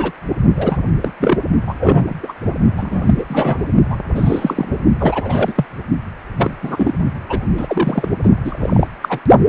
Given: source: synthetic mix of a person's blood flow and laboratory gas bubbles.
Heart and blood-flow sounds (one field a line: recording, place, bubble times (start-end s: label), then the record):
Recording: Doppler ultrasound of blood flow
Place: precordium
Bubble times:
0.00-0.11 s: bubbles
0.56-0.77 s: bubbles
1.02-1.12 s: bubbles
1.20-1.37 s: bubbles
1.67-1.75 s: bubbles
1.79-2.16 s: bubbles
2.23-2.33 s: bubbles
2.77-3.02 s: bubbles
3.06-3.25 s: bubbles
3.29-3.59 s: bubbles
3.90-3.96 s: bubbles
4.15-4.66 s: bubbles
4.99-5.66 s: bubbles
6.38-6.56 s: bubbles
6.62-6.93 s: bubbles
7.29-7.39 s: bubbles
7.57-8.09 s: bubbles
8.23-8.30 s: bubbles
8.44-8.89 s: bubbles
9.01-9.19 s: bubbles
From the record:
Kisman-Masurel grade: 243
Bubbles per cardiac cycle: several, 3 to 8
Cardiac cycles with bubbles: 100%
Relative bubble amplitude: loud (0.450 to 0.775)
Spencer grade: 3 (all of the cardiac periods contain showers or single bubble signals, but not dominating or overriding the cardiac motion signals)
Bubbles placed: only in the low amplitude regions of the cardiac cycle